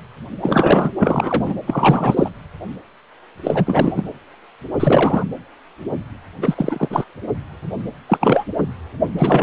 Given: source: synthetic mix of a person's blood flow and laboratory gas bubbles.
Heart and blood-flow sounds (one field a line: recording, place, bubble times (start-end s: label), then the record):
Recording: Doppler ultrasound of blood flow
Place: precordium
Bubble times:
0.40-0.91 s: bubbles
0.99-1.54 s: bubbles
1.66-2.29 s: bubbles
3.44-4.03 s: bubbles
4.79-5.25 s: bubbles
6.42-7.05 s: bubbles
8.08-8.18 s: bubbles
8.21-8.45 s: bubbles
9.19-9.43 s: bubbles
From the record:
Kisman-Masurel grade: 333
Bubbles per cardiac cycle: rolling drumbeat, 9 or more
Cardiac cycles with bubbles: 50 to 99%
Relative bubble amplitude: loud (0.450 to 0.775)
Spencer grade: 3 (all of the cardiac periods contain showers or single bubble signals, but not dominating or overriding the cardiac motion signals)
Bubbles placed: anywhere in the cardiac cycle